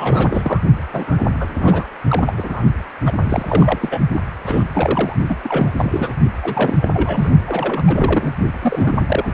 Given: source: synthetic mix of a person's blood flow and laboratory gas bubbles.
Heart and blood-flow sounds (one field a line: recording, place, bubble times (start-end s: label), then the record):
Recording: Doppler ultrasound of blood flow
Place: precordium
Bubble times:
0.00-0.64 s: bubbles
0.93-1.25 s: bubbles
1.39-1.86 s: bubbles
2.07-2.63 s: bubbles
3.05-3.12 s: bubbles
3.23-4.00 s: bubbles
4.12-4.21 s: bubbles
4.45-4.67 s: bubbles
4.74-5.16 s: bubbles
5.29-5.36 s: bubbles
5.42-5.71 s: bubbles
5.76-6.14 s: bubbles
6.42-6.77 s: bubbles
6.81-7.30 s: bubbles
7.46-8.34 s: bubbles
8.62-9.33 s: bubbles
From the record:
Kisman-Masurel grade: 332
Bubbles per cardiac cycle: rolling drumbeat, 9 or more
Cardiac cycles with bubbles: 50 to 99%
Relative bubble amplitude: moderate (0.250 to 0.450)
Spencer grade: 3 (all of the cardiac periods contain showers or single bubble signals, but not dominating or overriding the cardiac motion signals)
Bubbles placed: only in the low amplitude regions of the cardiac cycle